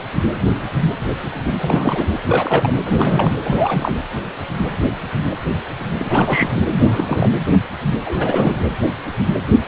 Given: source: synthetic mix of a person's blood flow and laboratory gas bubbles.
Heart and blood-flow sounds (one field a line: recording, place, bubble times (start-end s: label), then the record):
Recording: Doppler ultrasound of blood flow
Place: precordium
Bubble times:
1.44-2.08 s: bubbles
2.12-2.19 s: bubbles
2.26-2.72 s: bubbles
2.85-3.33 s: bubbles
3.40-3.98 s: bubbles
5.98-6.61 s: bubbles
6.71-7.32 s: bubbles
8.04-8.67 s: bubbles
From the record:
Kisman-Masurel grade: 332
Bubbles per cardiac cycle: rolling drumbeat, 9 or more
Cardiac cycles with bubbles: 50 to 99%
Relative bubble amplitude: moderate (0.250 to 0.450)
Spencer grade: 3 (all of the cardiac periods contain showers or single bubble signals, but not dominating or overriding the cardiac motion signals)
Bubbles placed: anywhere in the cardiac cycle